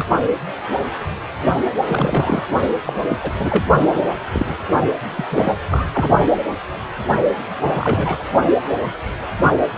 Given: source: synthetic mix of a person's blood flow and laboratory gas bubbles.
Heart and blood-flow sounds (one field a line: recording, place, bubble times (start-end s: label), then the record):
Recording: Doppler ultrasound of blood flow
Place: precordium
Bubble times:
0.00-0.05 s: bubbles
1.85-2.46 s: bubbles
2.85-2.93 s: bubbles
3.09-3.17 s: bubbles
3.20-3.31 s: bubbles
3.38-3.65 s: bubbles
3.78-4.00 s: bubbles
4.32-4.57 s: bubbles
5.16-5.25 s: bubbles
5.31-5.53 s: bubbles
5.71-5.84 s: bubbles
5.93-6.09 s: bubbles
7.57-8.24 s: bubbles
From the record:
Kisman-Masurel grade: 232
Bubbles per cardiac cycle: several, 3 to 8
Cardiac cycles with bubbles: 50 to 99%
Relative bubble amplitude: moderate (0.250 to 0.450)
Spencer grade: 3 (all of the cardiac periods contain showers or single bubble signals, but not dominating or overriding the cardiac motion signals)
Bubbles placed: only in the low amplitude regions of the cardiac cycle